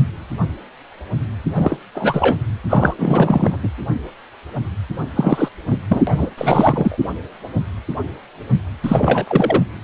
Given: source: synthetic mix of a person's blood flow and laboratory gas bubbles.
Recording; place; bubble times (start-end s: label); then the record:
Doppler ultrasound of blood flow; precordium
1.55-1.77 s: bubbles
1.94-2.39 s: bubbles
2.69-2.94 s: bubbles
2.98-3.57 s: bubbles
3.63-3.69 s: bubbles
5.16-5.49 s: bubbles
5.70-5.77 s: bubbles
5.89-6.02 s: bubbles
6.07-6.30 s: bubbles
6.38-6.98 s: bubbles
8.83-9.25 s: bubbles
9.28-9.62 s: bubbles
From the record:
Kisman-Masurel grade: 333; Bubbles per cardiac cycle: rolling drumbeat, 9 or more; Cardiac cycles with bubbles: 50 to 99%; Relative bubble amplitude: loud (0.450 to 0.775); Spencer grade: 3 (all of the cardiac periods contain showers or single bubble signals, but not dominating or overriding the cardiac motion signals); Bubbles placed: anywhere in the cardiac cycle